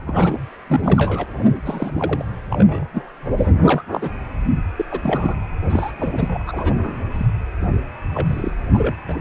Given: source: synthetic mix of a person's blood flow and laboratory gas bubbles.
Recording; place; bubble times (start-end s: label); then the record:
Doppler ultrasound of blood flow; precordium
0.06-0.39 s: bubbles
0.67-1.24 s: bubbles
1.62-2.25 s: bubbles
2.50-2.90 s: bubbles
2.93-3.02 s: bubbles
3.38-3.52 s: bubbles
3.66-3.83 s: bubbles
3.93-4.14 s: bubbles
4.76-4.85 s: bubbles
4.91-5.39 s: bubbles
5.70-5.91 s: bubbles
5.98-6.43 s: bubbles
6.47-7.00 s: bubbles
7.13-7.25 s: bubbles
7.61-7.66 s: bubbles
8.14-8.50 s: bubbles
8.73-8.95 s: bubbles
9.07-9.20 s: bubbles
From the record:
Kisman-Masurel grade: 242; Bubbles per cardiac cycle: several, 3 to 8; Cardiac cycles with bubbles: 100%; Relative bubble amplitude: moderate (0.250 to 0.450); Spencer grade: 3 (all of the cardiac periods contain showers or single bubble signals, but not dominating or overriding the cardiac motion signals); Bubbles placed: anywhere in the cardiac cycle